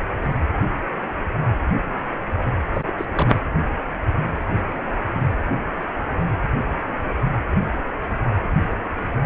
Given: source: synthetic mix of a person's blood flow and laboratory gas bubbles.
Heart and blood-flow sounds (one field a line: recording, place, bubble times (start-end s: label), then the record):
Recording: Doppler ultrasound of blood flow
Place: precordium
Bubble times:
2.73-2.94 s: bubbles
2.98-3.05 s: bubbles
3.12-3.41 s: bubbles
From the record:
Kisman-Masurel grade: 212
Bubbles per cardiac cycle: several, 3 to 8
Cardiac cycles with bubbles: 1 to 10%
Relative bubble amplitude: moderate (0.250 to 0.450)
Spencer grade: 1 (occasional bubble signal discernible with the cardiac motion signal, with majority of cardiac periods free of bubbles)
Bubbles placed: anywhere in the cardiac cycle